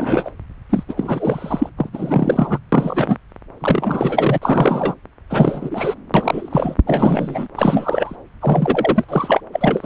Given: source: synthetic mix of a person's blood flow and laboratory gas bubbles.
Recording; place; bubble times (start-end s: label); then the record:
Doppler ultrasound of blood flow; subclavian vein
0.00-0.30 s: bubbles
0.69-0.83 s: bubbles
0.88-0.93 s: bubbles
0.96-1.69 s: bubbles
1.77-1.89 s: bubbles
1.93-2.58 s: bubbles
2.72-3.18 s: bubbles
3.60-4.38 s: bubbles
4.42-4.95 s: bubbles
5.29-5.95 s: bubbles
6.14-6.75 s: bubbles
6.87-7.48 s: bubbles
7.57-8.16 s: bubbles
8.40-9.05 s: bubbles
9.08-9.40 s: bubbles
9.52-9.86 s: bubbles
From the record:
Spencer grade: 3 (all of the cardiac periods contain showers or single bubble signals, but not dominating or overriding the cardiac motion signals); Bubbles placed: anywhere in the cardiac cycle